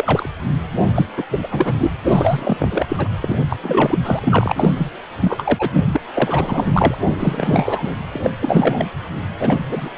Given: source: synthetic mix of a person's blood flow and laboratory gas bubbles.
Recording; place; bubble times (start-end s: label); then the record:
Doppler ultrasound of blood flow; precordium
0.00-0.29 s: bubbles
0.94-1.05 s: bubbles
1.17-1.25 s: bubbles
1.30-1.40 s: bubbles
1.43-1.48 s: bubbles
1.51-1.91 s: bubbles
2.05-2.86 s: bubbles
2.89-3.09 s: bubbles
3.21-3.44 s: bubbles
3.49-3.57 s: bubbles
3.63-3.99 s: bubbles
4.04-4.74 s: bubbles
4.77-4.87 s: bubbles
5.21-5.69 s: bubbles
5.73-6.00 s: bubbles
6.13-6.98 s: bubbles
7.19-7.95 s: bubbles
8.12-8.19 s: bubbles
8.23-8.30 s: bubbles
8.40-8.88 s: bubbles
9.39-9.65 s: bubbles
9.68-9.89 s: bubbles
From the record:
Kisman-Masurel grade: 342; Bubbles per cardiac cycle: rolling drumbeat, 9 or more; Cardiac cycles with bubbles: 100%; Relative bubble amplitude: moderate (0.250 to 0.450); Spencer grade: 3 (all of the cardiac periods contain showers or single bubble signals, but not dominating or overriding the cardiac motion signals); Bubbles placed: anywhere in the cardiac cycle